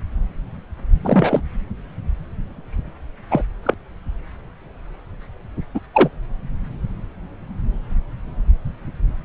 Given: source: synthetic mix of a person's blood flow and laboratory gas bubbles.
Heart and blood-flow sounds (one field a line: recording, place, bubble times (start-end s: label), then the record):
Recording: Doppler ultrasound of blood flow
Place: subclavian vein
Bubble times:
1.02-1.42 s: bubbles
3.30-3.44 s: bubbles
3.63-3.74 s: bubbles
5.74-5.79 s: bubbles
5.93-6.09 s: bubbles
From the record:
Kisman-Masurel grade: 223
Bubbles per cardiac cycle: several, 3 to 8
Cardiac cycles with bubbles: 10 to 50%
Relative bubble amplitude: loud (0.450 to 0.775)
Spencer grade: 2 (many but less than half of the cardiac periods contain bubble signals, singularly or in groups)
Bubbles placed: anywhere in the cardiac cycle